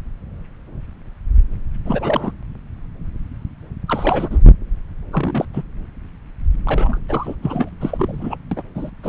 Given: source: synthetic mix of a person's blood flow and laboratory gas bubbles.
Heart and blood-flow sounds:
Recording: Doppler ultrasound of blood flow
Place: subclavian vein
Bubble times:
1.85-2.32 s: bubbles
3.88-4.39 s: bubbles
5.12-5.45 s: bubbles
5.54-5.62 s: bubbles
6.65-7.00 s: bubbles
7.09-7.35 s: bubbles
7.42-7.69 s: bubbles
7.80-8.37 s: bubbles
8.51-8.62 s: bubbles
8.75-8.91 s: bubbles
9.03-9.09 s: bubbles
From the record:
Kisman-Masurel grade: 222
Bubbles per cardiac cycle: several, 3 to 8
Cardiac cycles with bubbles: 10 to 50%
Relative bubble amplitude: moderate (0.250 to 0.450)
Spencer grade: 2 (many but less than half of the cardiac periods contain bubble signals, singularly or in groups)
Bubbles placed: anywhere in the cardiac cycle

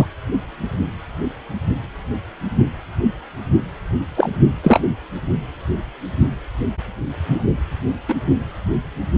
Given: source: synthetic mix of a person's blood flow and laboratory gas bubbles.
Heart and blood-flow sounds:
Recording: Doppler ultrasound of blood flow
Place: precordium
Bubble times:
0.00-0.06 s: bubbles
4.16-4.32 s: bubbles
4.62-4.80 s: bubbles
7.28-7.43 s: bubbles
8.08-8.16 s: bubbles
From the record:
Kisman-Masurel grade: 123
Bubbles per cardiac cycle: 1 to 2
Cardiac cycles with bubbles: 10 to 50%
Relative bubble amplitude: loud (0.450 to 0.775)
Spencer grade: 2 (many but less than half of the cardiac periods contain bubble signals, singularly or in groups)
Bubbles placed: only in the low amplitude regions of the cardiac cycle

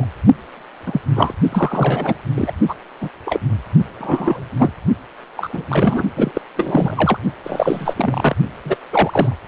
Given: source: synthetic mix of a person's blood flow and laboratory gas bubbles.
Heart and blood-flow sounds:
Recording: Doppler ultrasound of blood flow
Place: precordium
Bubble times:
0.00-0.04 s: bubbles
0.85-1.01 s: bubbles
1.16-1.33 s: bubbles
1.49-2.14 s: bubbles
2.34-2.52 s: bubbles
2.68-2.75 s: bubbles
3.01-3.09 s: bubbles
3.25-3.40 s: bubbles
3.98-4.49 s: bubbles
4.57-4.70 s: bubbles
5.36-5.50 s: bubbles
5.53-5.64 s: bubbles
5.69-6.03 s: bubbles
6.16-6.31 s: bubbles
6.34-6.41 s: bubbles
6.56-7.18 s: bubbles
7.43-8.34 s: bubbles
8.65-8.76 s: bubbles
8.92-9.36 s: bubbles
From the record:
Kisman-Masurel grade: 243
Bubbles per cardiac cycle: several, 3 to 8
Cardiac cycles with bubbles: 100%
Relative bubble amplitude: loud (0.450 to 0.775)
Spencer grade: 3 (all of the cardiac periods contain showers or single bubble signals, but not dominating or overriding the cardiac motion signals)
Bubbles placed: only in the low amplitude regions of the cardiac cycle

